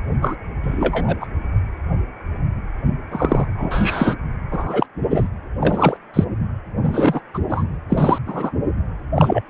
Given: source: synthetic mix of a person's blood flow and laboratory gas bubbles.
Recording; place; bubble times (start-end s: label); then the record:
Doppler ultrasound of blood flow; precordium
0.22-0.35 s: bubbles
0.62-1.17 s: bubbles
1.20-1.26 s: bubbles
3.11-3.46 s: bubbles
3.57-4.16 s: bubbles
4.51-4.87 s: bubbles
5.11-5.30 s: bubbles
5.61-5.97 s: bubbles
6.14-6.25 s: bubbles
6.83-7.21 s: bubbles
7.33-7.39 s: bubbles
7.49-7.66 s: bubbles
7.89-8.18 s: bubbles
8.26-8.51 s: bubbles
9.15-9.42 s: bubbles
From the record:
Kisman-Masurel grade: 233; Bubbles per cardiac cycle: several, 3 to 8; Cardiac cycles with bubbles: 50 to 99%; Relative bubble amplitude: loud (0.450 to 0.775); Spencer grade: 3 (all of the cardiac periods contain showers or single bubble signals, but not dominating or overriding the cardiac motion signals); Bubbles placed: anywhere in the cardiac cycle